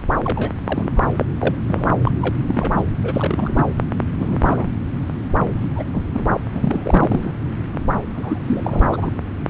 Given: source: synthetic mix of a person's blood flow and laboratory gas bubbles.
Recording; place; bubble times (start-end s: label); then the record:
Doppler ultrasound of blood flow; subclavian vein
0.23-0.51 s: bubbles
0.66-0.93 s: bubbles
0.96-1.01 s: bubbles
1.18-1.25 s: bubbles
1.40-1.55 s: bubbles
1.67-1.94 s: bubbles
2.05-2.11 s: bubbles
2.22-2.35 s: bubbles
2.48-2.74 s: bubbles
2.77-2.82 s: bubbles
3.03-3.73 s: bubbles
4.19-4.38 s: bubbles
4.40-4.71 s: bubbles
5.75-5.83 s: bubbles
5.92-6.04 s: bubbles
6.13-6.25 s: bubbles
6.52-7.33 s: bubbles
8.16-8.38 s: bubbles
8.46-8.79 s: bubbles
8.91-9.13 s: bubbles
9.48-9.50 s: bubbles
From the record:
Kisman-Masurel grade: 242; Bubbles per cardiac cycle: several, 3 to 8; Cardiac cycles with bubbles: 100%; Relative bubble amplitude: moderate (0.250 to 0.450); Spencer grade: 3 (all of the cardiac periods contain showers or single bubble signals, but not dominating or overriding the cardiac motion signals); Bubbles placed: anywhere in the cardiac cycle